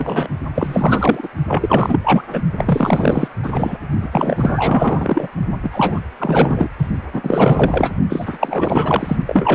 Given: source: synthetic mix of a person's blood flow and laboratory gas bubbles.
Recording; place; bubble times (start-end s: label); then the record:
Doppler ultrasound of blood flow; precordium
0.00-0.29 s: bubbles
0.55-1.28 s: bubbles
1.47-2.00 s: bubbles
2.04-2.23 s: bubbles
2.30-2.42 s: bubbles
2.58-3.31 s: bubbles
3.42-3.78 s: bubbles
4.01-4.09 s: bubbles
4.12-5.28 s: bubbles
5.62-6.08 s: bubbles
6.19-6.68 s: bubbles
6.78-6.88 s: bubbles
7.13-7.92 s: bubbles
8.09-9.17 s: bubbles
9.27-9.55 s: bubbles
From the record:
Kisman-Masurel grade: 444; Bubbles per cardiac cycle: continuous sound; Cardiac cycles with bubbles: 100%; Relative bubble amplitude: maximal (0.775 to 0.999); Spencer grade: 4 (maximum detectable bubble signal sounding continuously throughout systole and diastole of every cardiac period, and overriding the amplitude of the normal cardiac signals); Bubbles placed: only in the low amplitude regions of the cardiac cycle